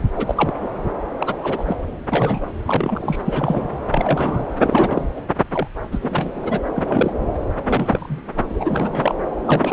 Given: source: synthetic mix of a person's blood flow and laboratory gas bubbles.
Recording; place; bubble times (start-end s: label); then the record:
Doppler ultrasound of blood flow; subclavian vein
0.15-0.53 s: bubbles
0.60-0.70 s: bubbles
1.19-1.36 s: bubbles
1.43-1.77 s: bubbles
2.12-2.46 s: bubbles
2.66-3.18 s: bubbles
3.25-3.83 s: bubbles
3.88-4.45 s: bubbles
4.62-5.08 s: bubbles
5.16-5.21 s: bubbles
5.52-5.67 s: bubbles
5.92-6.60 s: bubbles
6.75-6.83 s: bubbles
6.88-7.13 s: bubbles
7.67-8.20 s: bubbles
8.48-9.15 s: bubbles
9.46-9.73 s: bubbles
From the record:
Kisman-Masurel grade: 242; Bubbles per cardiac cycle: several, 3 to 8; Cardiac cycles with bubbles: 100%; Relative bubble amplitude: moderate (0.250 to 0.450); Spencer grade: 3 (all of the cardiac periods contain showers or single bubble signals, but not dominating or overriding the cardiac motion signals); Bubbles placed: anywhere in the cardiac cycle